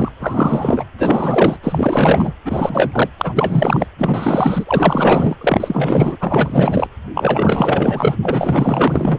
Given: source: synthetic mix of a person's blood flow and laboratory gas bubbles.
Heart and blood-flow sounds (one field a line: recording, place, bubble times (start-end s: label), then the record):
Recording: Doppler ultrasound of blood flow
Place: precordium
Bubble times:
0.00-0.12 s: bubbles
0.19-0.85 s: bubbles
0.98-1.58 s: bubbles
1.63-2.33 s: bubbles
2.45-3.10 s: bubbles
3.18-3.86 s: bubbles
3.98-5.35 s: bubbles
5.41-6.16 s: bubbles
6.19-6.88 s: bubbles
7.14-8.16 s: bubbles
8.22-9.19 s: bubbles
From the record:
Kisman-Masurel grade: 444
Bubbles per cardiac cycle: continuous sound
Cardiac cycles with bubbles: 100%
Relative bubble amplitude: maximal (0.775 to 0.999)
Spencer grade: 4 (maximum detectable bubble signal sounding continuously throughout systole and diastole of every cardiac period, and overriding the amplitude of the normal cardiac signals)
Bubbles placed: anywhere in the cardiac cycle